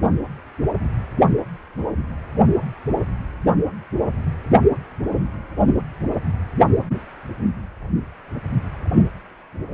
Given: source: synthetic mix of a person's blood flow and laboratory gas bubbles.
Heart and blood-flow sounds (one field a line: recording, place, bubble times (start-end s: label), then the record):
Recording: Doppler ultrasound of blood flow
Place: precordium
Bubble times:
8.94-9.07 s: bubbles
From the record:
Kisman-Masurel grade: 113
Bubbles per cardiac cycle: 1 to 2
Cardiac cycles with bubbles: 1 to 10%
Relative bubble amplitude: loud (0.450 to 0.775)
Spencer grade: 1 (occasional bubble signal discernible with the cardiac motion signal, with majority of cardiac periods free of bubbles)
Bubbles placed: anywhere in the cardiac cycle